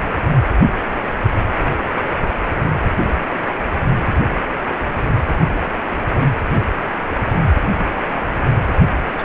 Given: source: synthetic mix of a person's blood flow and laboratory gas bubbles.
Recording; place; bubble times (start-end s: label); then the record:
Doppler ultrasound of blood flow; precordium
8.66-8.75 s: bubbles
9.14-9.25 s: bubbles
From the record:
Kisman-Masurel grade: 211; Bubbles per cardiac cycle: several, 3 to 8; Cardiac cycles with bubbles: 1 to 10%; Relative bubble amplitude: barely perceptible (0.100 to 0.250); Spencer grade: 1 (occasional bubble signal discernible with the cardiac motion signal, with majority of cardiac periods free of bubbles); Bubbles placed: anywhere in the cardiac cycle